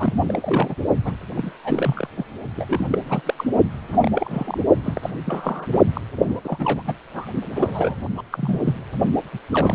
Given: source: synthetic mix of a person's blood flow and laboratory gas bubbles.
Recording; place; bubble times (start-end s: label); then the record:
Doppler ultrasound of blood flow; precordium
0.00-0.14 s: bubbles
0.26-0.75 s: bubbles
1.04-1.16 s: bubbles
1.34-1.51 s: bubbles
1.65-2.09 s: bubbles
2.17-2.24 s: bubbles
2.56-2.88 s: bubbles
2.90-2.98 s: bubbles
3.06-3.21 s: bubbles
3.25-3.34 s: bubbles
3.37-3.44 s: bubbles
3.88-4.12 s: bubbles
4.14-4.60 s: bubbles
4.83-5.11 s: bubbles
5.25-5.79 s: bubbles
5.93-6.01 s: bubbles
6.25-6.40 s: bubbles
6.45-6.82 s: bubbles
6.87-6.95 s: bubbles
7.14-7.28 s: bubbles
7.55-7.96 s: bubbles
8.17-8.22 s: bubbles
8.31-8.60 s: bubbles
8.64-8.75 s: bubbles
9.32-9.39 s: bubbles
9.51-9.74 s: bubbles
From the record:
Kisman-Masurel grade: 332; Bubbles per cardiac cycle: rolling drumbeat, 9 or more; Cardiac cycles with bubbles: 50 to 99%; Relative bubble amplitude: moderate (0.250 to 0.450); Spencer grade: 3 (all of the cardiac periods contain showers or single bubble signals, but not dominating or overriding the cardiac motion signals); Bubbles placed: only in the low amplitude regions of the cardiac cycle